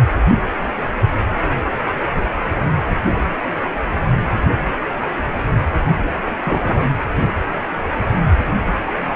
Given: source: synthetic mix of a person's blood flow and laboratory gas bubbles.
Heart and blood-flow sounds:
Doppler ultrasound of blood flow; precordium
6.43-6.87 s: bubbles
From the record:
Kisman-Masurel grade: 112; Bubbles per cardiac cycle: 1 to 2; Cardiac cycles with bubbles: 1 to 10%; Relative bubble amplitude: moderate (0.250 to 0.450); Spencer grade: 1 (occasional bubble signal discernible with the cardiac motion signal, with majority of cardiac periods free of bubbles); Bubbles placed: anywhere in the cardiac cycle

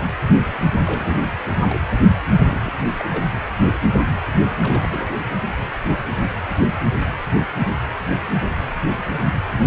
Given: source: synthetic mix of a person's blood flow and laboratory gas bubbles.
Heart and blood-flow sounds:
Doppler ultrasound of blood flow; precordium
0.83-1.32 s: bubbles
1.50-1.61 s: bubbles
1.69-1.80 s: bubbles
2.47-2.71 s: bubbles
2.98-3.06 s: bubbles
3.10-3.27 s: bubbles
4.58-5.08 s: bubbles
From the record:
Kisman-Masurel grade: 221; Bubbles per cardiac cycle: several, 3 to 8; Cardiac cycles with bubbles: 10 to 50%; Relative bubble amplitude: barely perceptible (0.100 to 0.250); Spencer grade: 2 (many but less than half of the cardiac periods contain bubble signals, singularly or in groups); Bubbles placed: anywhere in the cardiac cycle

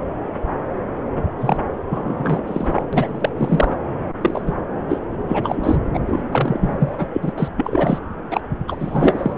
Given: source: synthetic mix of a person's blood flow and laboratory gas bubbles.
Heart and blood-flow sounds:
Doppler ultrasound of blood flow; subclavian vein
1.40-1.57 s: bubbles
1.86-2.44 s: bubbles
2.46-2.82 s: bubbles
2.92-3.29 s: bubbles
3.37-3.76 s: bubbles
4.21-4.42 s: bubbles
4.46-4.52 s: bubbles
4.88-4.99 s: bubbles
5.28-5.81 s: bubbles
5.93-6.00 s: bubbles
6.06-6.22 s: bubbles
6.31-7.07 s: bubbles
7.13-7.33 s: bubbles
7.38-7.48 s: bubbles
7.56-7.98 s: bubbles
8.30-8.41 s: bubbles
8.68-9.35 s: bubbles
From the record:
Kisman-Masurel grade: 333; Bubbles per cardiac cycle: rolling drumbeat, 9 or more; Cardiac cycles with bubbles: 50 to 99%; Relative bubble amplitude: loud (0.450 to 0.775); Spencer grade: 3 (all of the cardiac periods contain showers or single bubble signals, but not dominating or overriding the cardiac motion signals); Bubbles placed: anywhere in the cardiac cycle

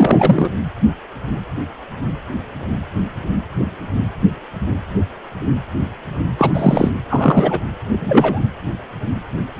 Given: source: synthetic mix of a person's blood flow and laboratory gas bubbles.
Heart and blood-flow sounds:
Doppler ultrasound of blood flow; precordium
0.00-0.49 s: bubbles
6.37-6.50 s: bubbles
6.53-6.90 s: bubbles
7.09-7.64 s: bubbles
7.90-8.41 s: bubbles
From the record:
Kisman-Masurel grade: 223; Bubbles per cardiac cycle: several, 3 to 8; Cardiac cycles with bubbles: 10 to 50%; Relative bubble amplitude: loud (0.450 to 0.775); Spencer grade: 2 (many but less than half of the cardiac periods contain bubble signals, singularly or in groups); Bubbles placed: anywhere in the cardiac cycle

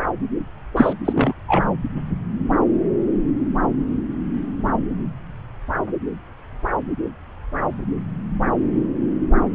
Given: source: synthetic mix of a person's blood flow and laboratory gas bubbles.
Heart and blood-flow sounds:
Doppler ultrasound of blood flow; subclavian vein
0.76-0.93 s: bubbles
1.04-1.33 s: bubbles
1.48-1.65 s: bubbles
From the record:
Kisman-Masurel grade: 213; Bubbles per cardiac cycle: several, 3 to 8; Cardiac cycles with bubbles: 1 to 10%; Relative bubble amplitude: loud (0.450 to 0.775); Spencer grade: 1 (occasional bubble signal discernible with the cardiac motion signal, with majority of cardiac periods free of bubbles); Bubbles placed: anywhere in the cardiac cycle

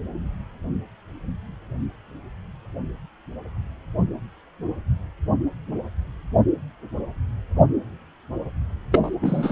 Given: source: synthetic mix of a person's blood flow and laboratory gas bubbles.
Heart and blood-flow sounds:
Doppler ultrasound of blood flow; precordium
8.92-9.16 s: bubbles
9.21-9.52 s: bubbles
From the record:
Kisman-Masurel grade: 212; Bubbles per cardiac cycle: several, 3 to 8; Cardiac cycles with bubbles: 1 to 10%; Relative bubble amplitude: moderate (0.250 to 0.450); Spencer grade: 1 (occasional bubble signal discernible with the cardiac motion signal, with majority of cardiac periods free of bubbles); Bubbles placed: anywhere in the cardiac cycle

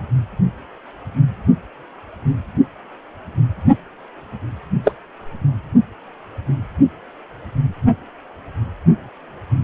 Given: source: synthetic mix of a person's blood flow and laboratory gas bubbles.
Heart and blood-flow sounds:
Doppler ultrasound of blood flow; precordium
4.84-4.93 s: bubbles
From the record:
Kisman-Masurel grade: 113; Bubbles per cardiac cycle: 1 to 2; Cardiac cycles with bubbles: 1 to 10%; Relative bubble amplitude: loud (0.450 to 0.775); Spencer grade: 1 (occasional bubble signal discernible with the cardiac motion signal, with majority of cardiac periods free of bubbles); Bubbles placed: only in the low amplitude regions of the cardiac cycle

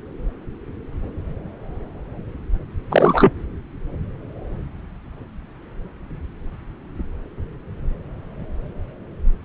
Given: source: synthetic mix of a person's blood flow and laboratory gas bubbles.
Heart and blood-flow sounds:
Doppler ultrasound of blood flow; subclavian vein
2.90-3.33 s: bubbles
From the record:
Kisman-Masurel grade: 213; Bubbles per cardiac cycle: several, 3 to 8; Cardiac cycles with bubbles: 1 to 10%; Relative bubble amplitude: loud (0.450 to 0.775); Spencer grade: 1 (occasional bubble signal discernible with the cardiac motion signal, with majority of cardiac periods free of bubbles); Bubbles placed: anywhere in the cardiac cycle

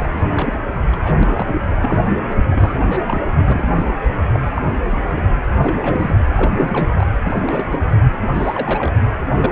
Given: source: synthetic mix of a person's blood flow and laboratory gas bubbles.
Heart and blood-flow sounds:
Doppler ultrasound of blood flow; precordium
0.00-0.09 s: bubbles
0.35-0.56 s: bubbles
0.92-0.96 s: bubbles
1.05-1.14 s: bubbles
1.23-1.54 s: bubbles
1.70-2.02 s: bubbles
2.30-2.35 s: bubbles
2.44-3.21 s: bubbles
3.37-3.68 s: bubbles
3.75-3.93 s: bubbles
4.33-4.40 s: bubbles
4.55-4.67 s: bubbles
4.90-5.06 s: bubbles
5.17-5.21 s: bubbles
5.58-6.17 s: bubbles
6.35-6.91 s: bubbles
6.94-7.06 s: bubbles
7.24-7.65 s: bubbles
7.71-7.79 s: bubbles
8.35-8.93 s: bubbles
9.30-9.52 s: bubbles
From the record:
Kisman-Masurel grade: 242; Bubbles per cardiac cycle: several, 3 to 8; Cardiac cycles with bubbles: 100%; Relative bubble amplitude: moderate (0.250 to 0.450); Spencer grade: 3 (all of the cardiac periods contain showers or single bubble signals, but not dominating or overriding the cardiac motion signals); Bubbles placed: anywhere in the cardiac cycle

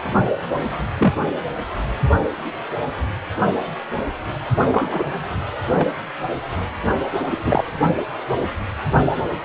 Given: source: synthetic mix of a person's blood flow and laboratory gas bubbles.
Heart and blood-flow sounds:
Doppler ultrasound of blood flow; precordium
0.97-1.14 s: bubbles
4.71-5.04 s: bubbles
5.72-5.88 s: bubbles
7.30-7.64 s: bubbles
From the record:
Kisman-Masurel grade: 123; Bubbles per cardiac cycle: 1 to 2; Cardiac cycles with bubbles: 10 to 50%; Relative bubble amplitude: loud (0.450 to 0.775); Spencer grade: 2 (many but less than half of the cardiac periods contain bubble signals, singularly or in groups); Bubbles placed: anywhere in the cardiac cycle

